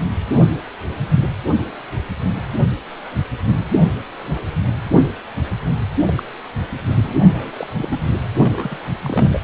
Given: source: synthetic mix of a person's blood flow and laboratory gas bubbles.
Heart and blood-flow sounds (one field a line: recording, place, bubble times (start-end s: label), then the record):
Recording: Doppler ultrasound of blood flow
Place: precordium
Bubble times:
6.05-6.13 s: bubbles
6.17-6.23 s: bubbles
6.87-7.15 s: bubbles
7.18-7.51 s: bubbles
7.57-7.67 s: bubbles
7.78-7.99 s: bubbles
8.41-8.78 s: bubbles
9.03-9.39 s: bubbles
From the record:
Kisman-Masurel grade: 221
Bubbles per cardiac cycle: several, 3 to 8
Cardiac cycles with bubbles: 10 to 50%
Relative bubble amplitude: barely perceptible (0.100 to 0.250)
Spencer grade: 2 (many but less than half of the cardiac periods contain bubble signals, singularly or in groups)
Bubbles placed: anywhere in the cardiac cycle